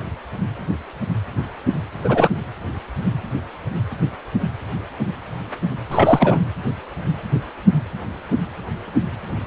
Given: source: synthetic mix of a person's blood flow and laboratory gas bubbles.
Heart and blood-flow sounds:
Doppler ultrasound of blood flow; precordium
2.03-2.28 s: bubbles
5.91-6.44 s: bubbles
From the record:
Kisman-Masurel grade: 213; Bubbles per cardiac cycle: several, 3 to 8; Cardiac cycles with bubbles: 1 to 10%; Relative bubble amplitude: loud (0.450 to 0.775); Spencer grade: 1 (occasional bubble signal discernible with the cardiac motion signal, with majority of cardiac periods free of bubbles); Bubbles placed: anywhere in the cardiac cycle

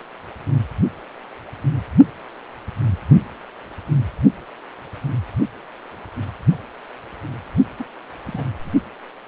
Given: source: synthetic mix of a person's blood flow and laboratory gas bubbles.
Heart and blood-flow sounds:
Doppler ultrasound of blood flow; precordium
7.78-7.87 s: bubbles
8.25-8.45 s: bubbles
8.64-8.70 s: bubbles
From the record:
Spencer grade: 1 (occasional bubble signal discernible with the cardiac motion signal, with majority of cardiac periods free of bubbles); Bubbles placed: only in the low amplitude regions of the cardiac cycle

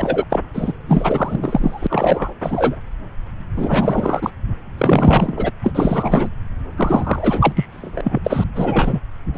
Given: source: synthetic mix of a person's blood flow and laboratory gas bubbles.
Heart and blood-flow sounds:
Doppler ultrasound of blood flow; subclavian vein
0.00-0.24 s: bubbles
0.30-0.40 s: bubbles
0.53-0.73 s: bubbles
0.88-2.33 s: bubbles
2.42-2.77 s: bubbles
3.55-4.30 s: bubbles
4.78-5.51 s: bubbles
5.63-6.29 s: bubbles
6.76-7.53 s: bubbles
7.55-7.66 s: bubbles
7.72-8.01 s: bubbles
8.04-8.19 s: bubbles
8.24-8.44 s: bubbles
8.55-9.01 s: bubbles
9.34-9.38 s: bubbles
From the record:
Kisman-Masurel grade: 343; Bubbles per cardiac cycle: rolling drumbeat, 9 or more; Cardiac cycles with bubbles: 100%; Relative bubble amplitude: loud (0.450 to 0.775); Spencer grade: 3 (all of the cardiac periods contain showers or single bubble signals, but not dominating or overriding the cardiac motion signals); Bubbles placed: anywhere in the cardiac cycle

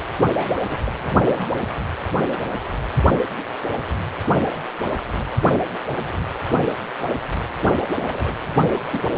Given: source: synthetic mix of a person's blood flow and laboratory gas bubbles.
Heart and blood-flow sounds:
Doppler ultrasound of blood flow; precordium
0.35-0.62 s: bubbles
0.69-0.78 s: bubbles
0.85-0.92 s: bubbles
1.00-1.21 s: bubbles
1.26-1.48 s: bubbles
4.38-4.50 s: bubbles
4.91-5.01 s: bubbles
5.18-5.23 s: bubbles
7.99-8.36 s: bubbles
8.65-9.09 s: bubbles
From the record:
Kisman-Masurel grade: 221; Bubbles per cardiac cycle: several, 3 to 8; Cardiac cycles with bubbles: 10 to 50%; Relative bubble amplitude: barely perceptible (0.100 to 0.250); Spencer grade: 2 (many but less than half of the cardiac periods contain bubble signals, singularly or in groups); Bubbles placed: anywhere in the cardiac cycle

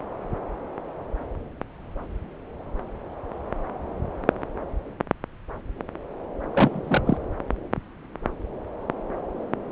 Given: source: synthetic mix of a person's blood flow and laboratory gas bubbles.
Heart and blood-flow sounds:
Doppler ultrasound of blood flow; subclavian vein
6.51-7.02 s: bubbles
7.05-7.17 s: bubbles
From the record:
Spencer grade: 1 (occasional bubble signal discernible with the cardiac motion signal, with majority of cardiac periods free of bubbles); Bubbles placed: anywhere in the cardiac cycle

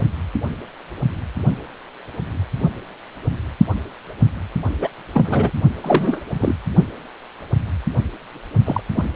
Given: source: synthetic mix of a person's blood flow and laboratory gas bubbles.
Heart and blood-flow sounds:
Doppler ultrasound of blood flow; precordium
4.81-4.89 s: bubbles
5.14-5.51 s: bubbles
5.81-6.22 s: bubbles
6.40-6.54 s: bubbles
8.65-8.80 s: bubbles
8.96-9.04 s: bubbles
From the record:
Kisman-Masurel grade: 222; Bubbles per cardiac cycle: several, 3 to 8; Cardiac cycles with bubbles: 10 to 50%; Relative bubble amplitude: moderate (0.250 to 0.450); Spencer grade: 2 (many but less than half of the cardiac periods contain bubble signals, singularly or in groups); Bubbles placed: only in the low amplitude regions of the cardiac cycle

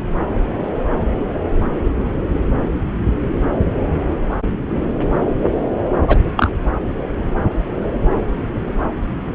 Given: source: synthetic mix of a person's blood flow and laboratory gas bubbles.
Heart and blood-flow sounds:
Doppler ultrasound of blood flow; subclavian vein
6.07-6.18 s: bubbles
6.36-6.51 s: bubbles
From the record:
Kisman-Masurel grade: 113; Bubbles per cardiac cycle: 1 to 2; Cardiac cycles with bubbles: 1 to 10%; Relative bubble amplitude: loud (0.450 to 0.775); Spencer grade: 1 (occasional bubble signal discernible with the cardiac motion signal, with majority of cardiac periods free of bubbles); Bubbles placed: anywhere in the cardiac cycle

